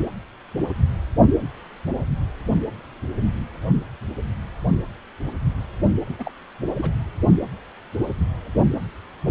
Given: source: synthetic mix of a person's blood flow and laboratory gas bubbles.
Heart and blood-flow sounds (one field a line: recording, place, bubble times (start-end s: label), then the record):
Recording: Doppler ultrasound of blood flow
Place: precordium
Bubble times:
6.06-6.16 s: bubbles
6.18-6.31 s: bubbles
6.75-6.91 s: bubbles
From the record:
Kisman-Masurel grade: 221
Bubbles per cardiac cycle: several, 3 to 8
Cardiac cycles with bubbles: 10 to 50%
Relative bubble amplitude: barely perceptible (0.100 to 0.250)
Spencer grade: 2 (many but less than half of the cardiac periods contain bubble signals, singularly or in groups)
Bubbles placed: only in the low amplitude regions of the cardiac cycle